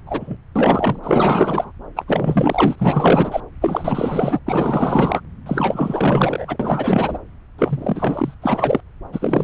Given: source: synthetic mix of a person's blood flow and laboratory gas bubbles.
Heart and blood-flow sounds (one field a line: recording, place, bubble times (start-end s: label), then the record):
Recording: Doppler ultrasound of blood flow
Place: subclavian vein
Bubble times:
0.06-0.37 s: bubbles
0.55-0.99 s: bubbles
1.03-1.72 s: bubbles
1.96-2.04 s: bubbles
2.07-3.41 s: bubbles
3.61-4.39 s: bubbles
4.46-5.21 s: bubbles
5.46-7.18 s: bubbles
7.58-8.34 s: bubbles
8.42-8.80 s: bubbles
9.12-9.44 s: bubbles
From the record:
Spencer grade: 4 (maximum detectable bubble signal sounding continuously throughout systole and diastole of every cardiac period, and overriding the amplitude of the normal cardiac signals)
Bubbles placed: anywhere in the cardiac cycle